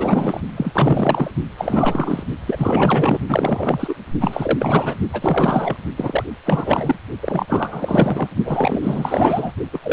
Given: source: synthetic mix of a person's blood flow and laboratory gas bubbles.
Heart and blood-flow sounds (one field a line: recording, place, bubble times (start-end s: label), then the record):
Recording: Doppler ultrasound of blood flow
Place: precordium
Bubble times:
0.00-0.41 s: bubbles
0.56-1.31 s: bubbles
1.57-2.24 s: bubbles
2.47-3.19 s: bubbles
3.29-3.95 s: bubbles
4.21-4.95 s: bubbles
5.12-5.77 s: bubbles
5.96-6.24 s: bubbles
6.46-6.99 s: bubbles
7.22-7.46 s: bubbles
7.49-8.28 s: bubbles
8.44-9.52 s: bubbles
9.72-9.79 s: bubbles
9.82-9.93 s: bubbles
From the record:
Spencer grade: 4 (maximum detectable bubble signal sounding continuously throughout systole and diastole of every cardiac period, and overriding the amplitude of the normal cardiac signals)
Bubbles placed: only in the low amplitude regions of the cardiac cycle